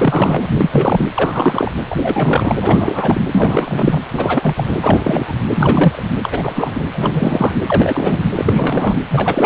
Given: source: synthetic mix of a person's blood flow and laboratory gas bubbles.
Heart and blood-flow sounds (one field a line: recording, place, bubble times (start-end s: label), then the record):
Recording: Doppler ultrasound of blood flow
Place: precordium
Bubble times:
0.00-0.46 s: bubbles
0.51-1.05 s: bubbles
1.16-1.72 s: bubbles
1.90-2.56 s: bubbles
2.61-3.21 s: bubbles
3.31-4.00 s: bubbles
4.12-4.76 s: bubbles
4.82-5.36 s: bubbles
5.49-6.04 s: bubbles
6.22-6.86 s: bubbles
6.92-7.58 s: bubbles
7.67-8.24 s: bubbles
8.35-8.99 s: bubbles
9.09-9.46 s: bubbles
From the record:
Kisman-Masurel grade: 343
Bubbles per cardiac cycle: rolling drumbeat, 9 or more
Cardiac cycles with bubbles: 100%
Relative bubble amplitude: loud (0.450 to 0.775)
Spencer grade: 3 (all of the cardiac periods contain showers or single bubble signals, but not dominating or overriding the cardiac motion signals)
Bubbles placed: anywhere in the cardiac cycle